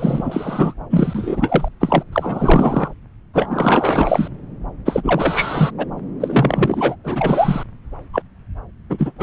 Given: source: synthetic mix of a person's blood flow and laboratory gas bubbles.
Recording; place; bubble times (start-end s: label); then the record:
Doppler ultrasound of blood flow; subclavian vein
0.00-0.73 s: bubbles
0.90-1.69 s: bubbles
1.80-2.05 s: bubbles
2.12-2.93 s: bubbles
3.33-4.28 s: bubbles
4.86-5.71 s: bubbles
5.78-5.86 s: bubbles
6.20-6.96 s: bubbles
7.04-7.63 s: bubbles
8.13-8.22 s: bubbles
8.89-9.12 s: bubbles
9.18-9.23 s: bubbles
From the record:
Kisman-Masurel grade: 343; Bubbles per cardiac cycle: rolling drumbeat, 9 or more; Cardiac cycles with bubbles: 100%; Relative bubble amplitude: loud (0.450 to 0.775); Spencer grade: 3 (all of the cardiac periods contain showers or single bubble signals, but not dominating or overriding the cardiac motion signals); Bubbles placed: anywhere in the cardiac cycle